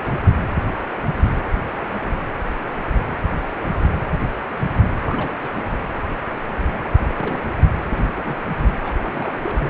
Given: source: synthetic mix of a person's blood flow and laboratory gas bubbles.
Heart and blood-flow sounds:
Doppler ultrasound of blood flow; precordium
0.00-0.21 s: bubbles
0.26-0.31 s: bubbles
5.00-5.33 s: bubbles
5.41-5.53 s: bubbles
5.75-5.81 s: bubbles
7.08-7.13 s: bubbles
7.18-7.42 s: bubbles
7.83-8.36 s: bubbles
8.83-8.94 s: bubbles
9.03-9.70 s: bubbles
From the record:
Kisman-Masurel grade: 221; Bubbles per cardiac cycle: several, 3 to 8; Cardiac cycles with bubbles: 10 to 50%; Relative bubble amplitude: barely perceptible (0.100 to 0.250); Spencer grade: 2 (many but less than half of the cardiac periods contain bubble signals, singularly or in groups); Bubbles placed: anywhere in the cardiac cycle

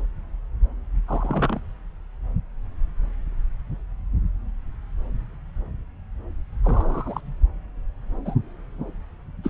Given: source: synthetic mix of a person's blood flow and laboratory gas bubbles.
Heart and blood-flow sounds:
Doppler ultrasound of blood flow; subclavian vein
1.08-1.60 s: bubbles
6.64-7.21 s: bubbles
8.25-8.35 s: bubbles
9.44-9.50 s: bubbles
From the record:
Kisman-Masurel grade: 121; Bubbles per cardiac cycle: 1 to 2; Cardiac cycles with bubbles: 10 to 50%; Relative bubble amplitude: barely perceptible (0.100 to 0.250); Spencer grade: 2 (many but less than half of the cardiac periods contain bubble signals, singularly or in groups); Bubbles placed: anywhere in the cardiac cycle

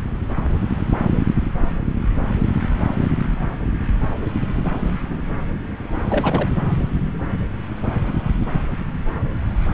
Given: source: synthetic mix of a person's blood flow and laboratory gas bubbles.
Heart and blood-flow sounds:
Doppler ultrasound of blood flow; subclavian vein
6.08-6.55 s: bubbles
From the record:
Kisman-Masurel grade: 212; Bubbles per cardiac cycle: several, 3 to 8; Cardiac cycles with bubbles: 1 to 10%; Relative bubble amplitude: moderate (0.250 to 0.450); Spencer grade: 1 (occasional bubble signal discernible with the cardiac motion signal, with majority of cardiac periods free of bubbles); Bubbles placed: anywhere in the cardiac cycle

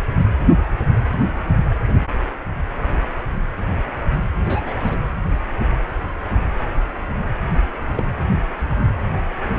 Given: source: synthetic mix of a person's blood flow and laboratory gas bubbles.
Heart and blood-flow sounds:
Doppler ultrasound of blood flow; precordium
4.46-4.97 s: bubbles
7.94-8.03 s: bubbles
From the record:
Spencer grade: 2 (many but less than half of the cardiac periods contain bubble signals, singularly or in groups); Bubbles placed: only in the low amplitude regions of the cardiac cycle

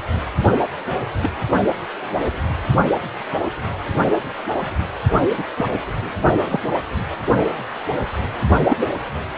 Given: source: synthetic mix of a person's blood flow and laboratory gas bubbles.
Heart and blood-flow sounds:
Doppler ultrasound of blood flow; precordium
1.22-1.30 s: bubbles
5.37-5.45 s: bubbles
5.57-5.72 s: bubbles
6.45-6.60 s: bubbles
8.69-8.77 s: bubbles
From the record:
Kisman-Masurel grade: 122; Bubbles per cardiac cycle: 1 to 2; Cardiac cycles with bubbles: 10 to 50%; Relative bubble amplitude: moderate (0.250 to 0.450); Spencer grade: 2 (many but less than half of the cardiac periods contain bubble signals, singularly or in groups); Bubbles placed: only in the low amplitude regions of the cardiac cycle

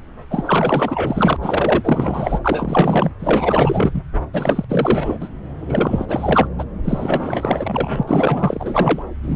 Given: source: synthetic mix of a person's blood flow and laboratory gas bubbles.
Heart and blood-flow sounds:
Doppler ultrasound of blood flow; subclavian vein
0.30-1.36 s: bubbles
1.42-2.39 s: bubbles
2.45-3.11 s: bubbles
3.19-4.02 s: bubbles
4.33-4.65 s: bubbles
4.69-5.29 s: bubbles
5.59-6.48 s: bubbles
6.58-6.65 s: bubbles
6.84-9.03 s: bubbles
9.22-9.35 s: bubbles
From the record:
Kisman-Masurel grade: 444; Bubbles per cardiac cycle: continuous sound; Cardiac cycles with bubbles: 100%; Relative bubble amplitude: maximal (0.775 to 0.999); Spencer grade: 4 (maximum detectable bubble signal sounding continuously throughout systole and diastole of every cardiac period, and overriding the amplitude of the normal cardiac signals); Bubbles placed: anywhere in the cardiac cycle

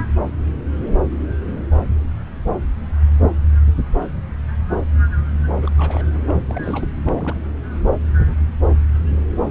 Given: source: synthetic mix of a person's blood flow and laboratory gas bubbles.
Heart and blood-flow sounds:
Doppler ultrasound of blood flow; subclavian vein
5.62-5.70 s: bubbles
5.78-6.19 s: bubbles
6.28-6.87 s: bubbles
7.05-7.39 s: bubbles
From the record:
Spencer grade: 2 (many but less than half of the cardiac periods contain bubble signals, singularly or in groups); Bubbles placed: anywhere in the cardiac cycle

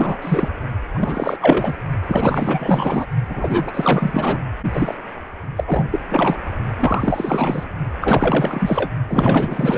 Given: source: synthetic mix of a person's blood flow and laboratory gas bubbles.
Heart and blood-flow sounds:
Doppler ultrasound of blood flow; precordium
0.00-0.17 s: bubbles
0.22-0.50 s: bubbles
0.94-1.37 s: bubbles
1.41-1.75 s: bubbles
2.04-3.06 s: bubbles
3.29-4.39 s: bubbles
4.73-4.94 s: bubbles
5.56-5.84 s: bubbles
5.91-5.99 s: bubbles
6.09-6.39 s: bubbles
6.77-7.69 s: bubbles
8.01-8.91 s: bubbles
9.08-9.77 s: bubbles
From the record:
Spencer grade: 4 (maximum detectable bubble signal sounding continuously throughout systole and diastole of every cardiac period, and overriding the amplitude of the normal cardiac signals); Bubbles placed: only in the low amplitude regions of the cardiac cycle

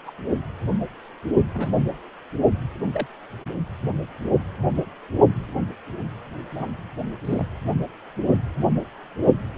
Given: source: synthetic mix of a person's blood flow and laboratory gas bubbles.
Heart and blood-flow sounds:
Doppler ultrasound of blood flow; precordium
0.07-0.11 s: bubbles
1.54-1.71 s: bubbles
2.93-3.06 s: bubbles
6.51-6.71 s: bubbles
7.24-7.45 s: bubbles
From the record:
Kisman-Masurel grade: 122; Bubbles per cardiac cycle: 1 to 2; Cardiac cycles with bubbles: 10 to 50%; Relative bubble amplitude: moderate (0.250 to 0.450); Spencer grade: 2 (many but less than half of the cardiac periods contain bubble signals, singularly or in groups); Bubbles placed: only in the low amplitude regions of the cardiac cycle

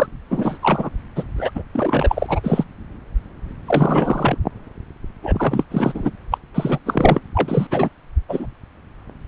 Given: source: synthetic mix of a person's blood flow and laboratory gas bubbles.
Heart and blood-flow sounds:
Doppler ultrasound of blood flow; subclavian vein
0.00-0.07 s: bubbles
0.30-0.58 s: bubbles
0.62-0.89 s: bubbles
1.16-1.24 s: bubbles
1.37-1.51 s: bubbles
1.55-1.63 s: bubbles
1.73-2.40 s: bubbles
2.43-2.64 s: bubbles
3.67-4.38 s: bubbles
5.22-5.63 s: bubbles
5.71-6.10 s: bubbles
6.31-6.38 s: bubbles
6.54-6.79 s: bubbles
6.86-7.20 s: bubbles
7.34-7.67 s: bubbles
7.71-7.89 s: bubbles
8.29-8.46 s: bubbles
From the record:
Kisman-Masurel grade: 333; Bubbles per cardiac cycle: rolling drumbeat, 9 or more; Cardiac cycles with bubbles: 50 to 99%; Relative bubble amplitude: loud (0.450 to 0.775); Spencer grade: 3 (all of the cardiac periods contain showers or single bubble signals, but not dominating or overriding the cardiac motion signals); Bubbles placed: anywhere in the cardiac cycle

